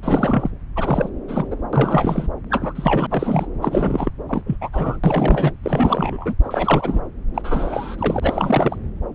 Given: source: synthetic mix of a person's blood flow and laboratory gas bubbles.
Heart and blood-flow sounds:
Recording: Doppler ultrasound of blood flow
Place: subclavian vein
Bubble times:
0.02-0.50 s: bubbles
0.75-1.09 s: bubbles
1.28-1.47 s: bubbles
1.50-1.56 s: bubbles
1.72-2.28 s: bubbles
2.50-3.07 s: bubbles
3.10-3.47 s: bubbles
3.62-4.10 s: bubbles
4.29-4.42 s: bubbles
4.46-4.56 s: bubbles
4.61-4.69 s: bubbles
4.72-4.97 s: bubbles
5.04-5.52 s: bubbles
5.63-6.34 s: bubbles
6.43-7.00 s: bubbles
7.34-8.77 s: bubbles
From the record:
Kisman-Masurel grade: 343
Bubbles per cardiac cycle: rolling drumbeat, 9 or more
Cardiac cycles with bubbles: 100%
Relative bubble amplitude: loud (0.450 to 0.775)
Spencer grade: 3 (all of the cardiac periods contain showers or single bubble signals, but not dominating or overriding the cardiac motion signals)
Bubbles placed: anywhere in the cardiac cycle

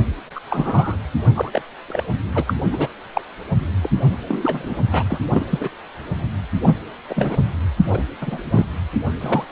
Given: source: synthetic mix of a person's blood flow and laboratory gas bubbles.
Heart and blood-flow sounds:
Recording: Doppler ultrasound of blood flow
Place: precordium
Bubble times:
0.35-0.40 s: bubbles
0.49-0.97 s: bubbles
1.35-1.50 s: bubbles
1.53-1.61 s: bubbles
1.88-2.03 s: bubbles
2.33-2.44 s: bubbles
2.47-2.54 s: bubbles
2.72-2.88 s: bubbles
3.14-3.22 s: bubbles
3.83-3.89 s: bubbles
4.28-4.77 s: bubbles
4.92-5.04 s: bubbles
5.09-5.20 s: bubbles
5.29-5.46 s: bubbles
5.50-5.70 s: bubbles
6.62-6.77 s: bubbles
7.09-7.42 s: bubbles
7.87-8.03 s: bubbles
8.21-8.38 s: bubbles
8.44-8.65 s: bubbles
9.21-9.45 s: bubbles
From the record:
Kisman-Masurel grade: 232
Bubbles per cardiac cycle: several, 3 to 8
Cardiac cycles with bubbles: 50 to 99%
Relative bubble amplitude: moderate (0.250 to 0.450)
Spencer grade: 3 (all of the cardiac periods contain showers or single bubble signals, but not dominating or overriding the cardiac motion signals)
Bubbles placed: only in the low amplitude regions of the cardiac cycle

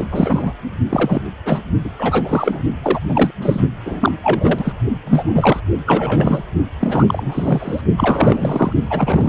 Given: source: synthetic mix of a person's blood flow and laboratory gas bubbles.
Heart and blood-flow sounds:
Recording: Doppler ultrasound of blood flow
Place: precordium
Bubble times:
0.00-0.08 s: bubbles
0.11-0.53 s: bubbles
0.89-1.21 s: bubbles
1.45-1.61 s: bubbles
1.84-1.90 s: bubbles
1.97-2.62 s: bubbles
2.83-2.99 s: bubbles
3.08-3.30 s: bubbles
3.42-3.60 s: bubbles
3.85-4.12 s: bubbles
4.23-4.72 s: bubbles
5.05-5.60 s: bubbles
5.85-6.43 s: bubbles
6.80-7.81 s: bubbles
7.97-8.72 s: bubbles
8.83-9.29 s: bubbles
From the record:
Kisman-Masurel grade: 343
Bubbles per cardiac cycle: rolling drumbeat, 9 or more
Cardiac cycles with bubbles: 100%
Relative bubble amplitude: loud (0.450 to 0.775)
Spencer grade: 3 (all of the cardiac periods contain showers or single bubble signals, but not dominating or overriding the cardiac motion signals)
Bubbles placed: only in the low amplitude regions of the cardiac cycle

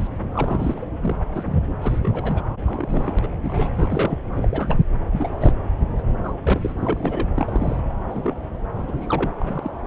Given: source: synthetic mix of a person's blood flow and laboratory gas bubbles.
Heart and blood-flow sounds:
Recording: Doppler ultrasound of blood flow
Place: subclavian vein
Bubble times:
0.00-0.07 s: bubbles
0.32-0.83 s: bubbles
1.01-1.17 s: bubbles
1.33-1.62 s: bubbles
1.81-2.43 s: bubbles
2.65-3.14 s: bubbles
3.19-3.28 s: bubbles
3.43-3.72 s: bubbles
3.75-4.19 s: bubbles
4.36-4.84 s: bubbles
5.11-5.53 s: bubbles
5.98-6.02 s: bubbles
6.23-6.33 s: bubbles
6.43-6.72 s: bubbles
6.76-7.29 s: bubbles
7.34-7.80 s: bubbles
8.09-8.37 s: bubbles
8.73-9.34 s: bubbles
9.39-9.72 s: bubbles
From the record:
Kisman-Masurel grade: 242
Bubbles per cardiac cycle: several, 3 to 8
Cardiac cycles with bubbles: 100%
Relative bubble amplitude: moderate (0.250 to 0.450)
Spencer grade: 3 (all of the cardiac periods contain showers or single bubble signals, but not dominating or overriding the cardiac motion signals)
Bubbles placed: anywhere in the cardiac cycle

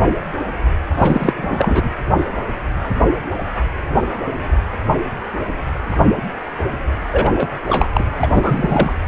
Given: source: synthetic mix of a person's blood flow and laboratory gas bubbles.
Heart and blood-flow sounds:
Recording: Doppler ultrasound of blood flow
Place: precordium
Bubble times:
0.89-1.90 s: bubbles
7.11-7.48 s: bubbles
7.67-7.86 s: bubbles
7.92-8.05 s: bubbles
8.19-8.27 s: bubbles
8.34-8.92 s: bubbles
From the record:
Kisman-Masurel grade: 223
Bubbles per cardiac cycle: several, 3 to 8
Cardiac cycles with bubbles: 10 to 50%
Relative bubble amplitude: loud (0.450 to 0.775)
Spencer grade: 2 (many but less than half of the cardiac periods contain bubble signals, singularly or in groups)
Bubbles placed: anywhere in the cardiac cycle

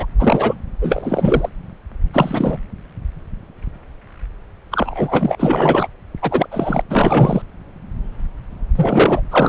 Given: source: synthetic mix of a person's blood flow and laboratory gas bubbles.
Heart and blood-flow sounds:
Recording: Doppler ultrasound of blood flow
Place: subclavian vein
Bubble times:
0.00-0.06 s: bubbles
0.19-0.55 s: bubbles
0.81-1.49 s: bubbles
2.13-2.57 s: bubbles
4.71-5.88 s: bubbles
6.21-6.47 s: bubbles
6.51-6.81 s: bubbles
6.90-7.42 s: bubbles
8.75-9.21 s: bubbles
9.30-9.49 s: bubbles
From the record:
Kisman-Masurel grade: 333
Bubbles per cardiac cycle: rolling drumbeat, 9 or more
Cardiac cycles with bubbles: 50 to 99%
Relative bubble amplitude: loud (0.450 to 0.775)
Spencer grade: 3 (all of the cardiac periods contain showers or single bubble signals, but not dominating or overriding the cardiac motion signals)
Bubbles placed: anywhere in the cardiac cycle

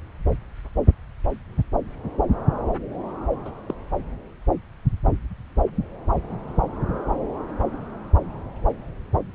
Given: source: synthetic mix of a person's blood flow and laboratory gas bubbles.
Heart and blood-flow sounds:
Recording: Doppler ultrasound of blood flow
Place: subclavian vein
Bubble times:
3.45-3.50 s: bubbles
3.68-3.73 s: bubbles
From the record:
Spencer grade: 1 (occasional bubble signal discernible with the cardiac motion signal, with majority of cardiac periods free of bubbles)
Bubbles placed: anywhere in the cardiac cycle

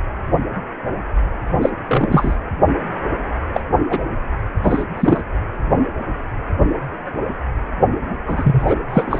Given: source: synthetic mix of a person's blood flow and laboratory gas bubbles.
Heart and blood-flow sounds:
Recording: Doppler ultrasound of blood flow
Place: precordium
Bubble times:
1.61-1.70 s: bubbles
1.88-2.35 s: bubbles
3.53-3.60 s: bubbles
3.90-3.99 s: bubbles
4.64-4.84 s: bubbles
4.97-5.23 s: bubbles
8.28-8.76 s: bubbles
8.88-9.19 s: bubbles
From the record:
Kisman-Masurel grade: 233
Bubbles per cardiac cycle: several, 3 to 8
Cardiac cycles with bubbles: 50 to 99%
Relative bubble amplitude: loud (0.450 to 0.775)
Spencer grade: 3 (all of the cardiac periods contain showers or single bubble signals, but not dominating or overriding the cardiac motion signals)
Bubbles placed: anywhere in the cardiac cycle

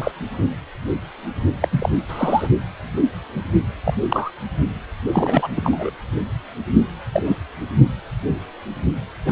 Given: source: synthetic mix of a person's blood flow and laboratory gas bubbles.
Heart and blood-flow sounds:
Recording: Doppler ultrasound of blood flow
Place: precordium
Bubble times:
0.00-0.11 s: bubbles
1.61-1.68 s: bubbles
1.71-1.89 s: bubbles
2.08-2.48 s: bubbles
3.84-3.94 s: bubbles
4.08-4.31 s: bubbles
5.13-5.47 s: bubbles
5.56-5.90 s: bubbles
7.13-7.22 s: bubbles
7.25-7.37 s: bubbles
9.25-9.31 s: bubbles
From the record:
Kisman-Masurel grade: 222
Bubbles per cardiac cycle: several, 3 to 8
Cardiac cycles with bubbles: 10 to 50%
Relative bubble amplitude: moderate (0.250 to 0.450)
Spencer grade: 2 (many but less than half of the cardiac periods contain bubble signals, singularly or in groups)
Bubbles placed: anywhere in the cardiac cycle

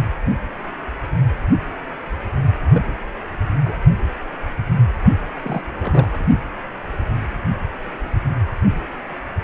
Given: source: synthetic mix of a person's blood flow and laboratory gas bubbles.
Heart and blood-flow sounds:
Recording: Doppler ultrasound of blood flow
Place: precordium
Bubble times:
2.60-2.93 s: bubbles
3.65-3.74 s: bubbles
5.35-5.62 s: bubbles
5.80-6.27 s: bubbles
From the record:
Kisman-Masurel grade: 221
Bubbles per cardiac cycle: several, 3 to 8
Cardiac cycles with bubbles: 10 to 50%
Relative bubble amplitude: barely perceptible (0.100 to 0.250)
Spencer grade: 2 (many but less than half of the cardiac periods contain bubble signals, singularly or in groups)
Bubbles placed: only in the low amplitude regions of the cardiac cycle

